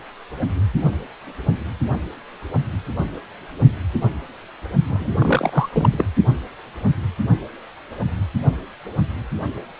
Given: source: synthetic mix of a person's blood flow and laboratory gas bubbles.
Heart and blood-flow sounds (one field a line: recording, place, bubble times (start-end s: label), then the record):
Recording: Doppler ultrasound of blood flow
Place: precordium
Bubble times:
4.88-5.10 s: bubbles
5.20-5.69 s: bubbles
5.72-5.89 s: bubbles
5.92-6.05 s: bubbles
From the record:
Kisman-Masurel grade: 212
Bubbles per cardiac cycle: several, 3 to 8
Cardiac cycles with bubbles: 1 to 10%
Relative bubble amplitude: moderate (0.250 to 0.450)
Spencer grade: 1 (occasional bubble signal discernible with the cardiac motion signal, with majority of cardiac periods free of bubbles)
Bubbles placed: only in the low amplitude regions of the cardiac cycle